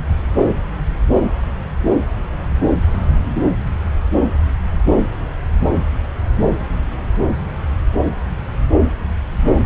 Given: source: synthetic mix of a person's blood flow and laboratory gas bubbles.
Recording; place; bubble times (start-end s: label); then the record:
Doppler ultrasound of blood flow; subclavian vein
3.34-3.42 s: bubbles
From the record:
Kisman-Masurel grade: 111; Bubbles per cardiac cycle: 1 to 2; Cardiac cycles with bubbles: 1 to 10%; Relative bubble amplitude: barely perceptible (0.100 to 0.250); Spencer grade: 1 (occasional bubble signal discernible with the cardiac motion signal, with majority of cardiac periods free of bubbles); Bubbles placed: anywhere in the cardiac cycle